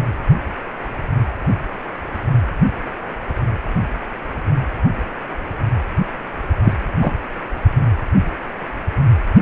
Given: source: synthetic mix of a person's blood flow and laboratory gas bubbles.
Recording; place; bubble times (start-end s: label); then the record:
Doppler ultrasound of blood flow; precordium
6.65-6.73 s: bubbles
7.01-7.13 s: bubbles
From the record:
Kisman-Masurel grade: 123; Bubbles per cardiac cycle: 1 to 2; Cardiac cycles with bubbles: 10 to 50%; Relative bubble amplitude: loud (0.450 to 0.775); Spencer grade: 2 (many but less than half of the cardiac periods contain bubble signals, singularly or in groups); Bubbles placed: anywhere in the cardiac cycle